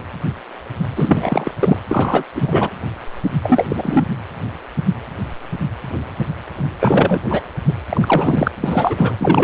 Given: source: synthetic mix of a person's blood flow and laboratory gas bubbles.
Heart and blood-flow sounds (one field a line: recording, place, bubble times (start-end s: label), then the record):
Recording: Doppler ultrasound of blood flow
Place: precordium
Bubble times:
0.96-1.52 s: bubbles
1.60-1.79 s: bubbles
1.89-2.23 s: bubbles
2.35-2.70 s: bubbles
3.43-3.65 s: bubbles
3.69-4.04 s: bubbles
6.80-7.20 s: bubbles
7.29-7.42 s: bubbles
7.67-7.72 s: bubbles
7.89-8.48 s: bubbles
8.60-9.16 s: bubbles
9.20-9.44 s: bubbles
From the record:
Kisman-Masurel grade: 333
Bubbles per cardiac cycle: rolling drumbeat, 9 or more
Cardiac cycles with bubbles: 50 to 99%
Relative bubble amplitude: loud (0.450 to 0.775)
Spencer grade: 3 (all of the cardiac periods contain showers or single bubble signals, but not dominating or overriding the cardiac motion signals)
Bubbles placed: anywhere in the cardiac cycle